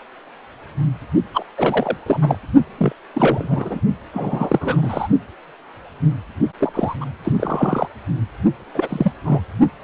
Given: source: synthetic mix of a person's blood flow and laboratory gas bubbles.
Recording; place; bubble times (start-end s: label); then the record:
Doppler ultrasound of blood flow; precordium
1.33-1.46 s: bubbles
1.57-1.97 s: bubbles
2.06-2.39 s: bubbles
2.77-2.93 s: bubbles
3.14-3.80 s: bubbles
4.13-5.08 s: bubbles
6.59-6.95 s: bubbles
7.00-7.05 s: bubbles
7.24-7.32 s: bubbles
7.37-7.88 s: bubbles
8.74-9.11 s: bubbles
9.24-9.41 s: bubbles
From the record:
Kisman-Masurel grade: 233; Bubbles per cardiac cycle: several, 3 to 8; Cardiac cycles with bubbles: 50 to 99%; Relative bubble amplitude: loud (0.450 to 0.775); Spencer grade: 3 (all of the cardiac periods contain showers or single bubble signals, but not dominating or overriding the cardiac motion signals); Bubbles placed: only in the low amplitude regions of the cardiac cycle